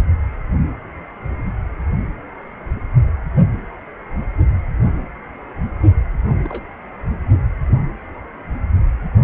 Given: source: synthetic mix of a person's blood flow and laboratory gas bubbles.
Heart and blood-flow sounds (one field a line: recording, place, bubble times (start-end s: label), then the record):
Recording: Doppler ultrasound of blood flow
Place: precordium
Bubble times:
6.42-6.63 s: bubbles
From the record:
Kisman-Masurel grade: 121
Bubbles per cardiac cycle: 1 to 2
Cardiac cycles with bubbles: 10 to 50%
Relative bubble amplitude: barely perceptible (0.100 to 0.250)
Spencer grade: 2 (many but less than half of the cardiac periods contain bubble signals, singularly or in groups)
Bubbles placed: anywhere in the cardiac cycle